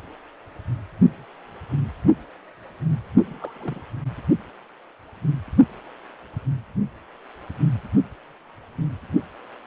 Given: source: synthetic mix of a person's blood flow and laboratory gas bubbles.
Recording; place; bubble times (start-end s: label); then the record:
Doppler ultrasound of blood flow; precordium
3.25-3.82 s: bubbles
From the record:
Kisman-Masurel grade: 111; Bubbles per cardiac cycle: 1 to 2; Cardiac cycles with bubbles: 1 to 10%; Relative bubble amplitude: barely perceptible (0.100 to 0.250); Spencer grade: 1 (occasional bubble signal discernible with the cardiac motion signal, with majority of cardiac periods free of bubbles); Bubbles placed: only in the low amplitude regions of the cardiac cycle